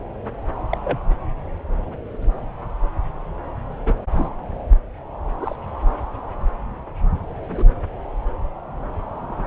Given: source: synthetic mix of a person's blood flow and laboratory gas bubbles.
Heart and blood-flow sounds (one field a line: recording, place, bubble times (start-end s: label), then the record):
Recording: Doppler ultrasound of blood flow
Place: subclavian vein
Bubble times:
0.71-0.78 s: bubbles
0.83-0.99 s: bubbles
3.86-3.92 s: bubbles
4.12-4.29 s: bubbles
5.39-5.56 s: bubbles
7.49-7.70 s: bubbles
From the record:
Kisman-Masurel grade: 122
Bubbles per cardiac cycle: 1 to 2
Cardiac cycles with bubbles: 10 to 50%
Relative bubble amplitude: moderate (0.250 to 0.450)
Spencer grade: 2 (many but less than half of the cardiac periods contain bubble signals, singularly or in groups)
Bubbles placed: anywhere in the cardiac cycle